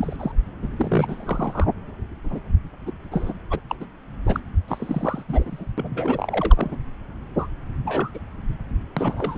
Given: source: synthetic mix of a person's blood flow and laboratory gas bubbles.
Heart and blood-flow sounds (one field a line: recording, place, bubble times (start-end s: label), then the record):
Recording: Doppler ultrasound of blood flow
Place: subclavian vein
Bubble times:
0.00-0.16 s: bubbles
0.19-0.32 s: bubbles
0.62-0.69 s: bubbles
0.76-1.71 s: bubbles
2.24-2.39 s: bubbles
2.86-2.92 s: bubbles
3.12-3.33 s: bubbles
3.50-3.59 s: bubbles
3.68-3.75 s: bubbles
3.80-3.86 s: bubbles
4.25-4.40 s: bubbles
4.68-5.23 s: bubbles
5.28-5.65 s: bubbles
5.77-6.76 s: bubbles
7.37-7.47 s: bubbles
7.85-8.19 s: bubbles
8.96-9.38 s: bubbles
From the record:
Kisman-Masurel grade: 242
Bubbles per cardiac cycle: several, 3 to 8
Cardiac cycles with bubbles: 100%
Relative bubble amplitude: moderate (0.250 to 0.450)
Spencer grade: 3 (all of the cardiac periods contain showers or single bubble signals, but not dominating or overriding the cardiac motion signals)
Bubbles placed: anywhere in the cardiac cycle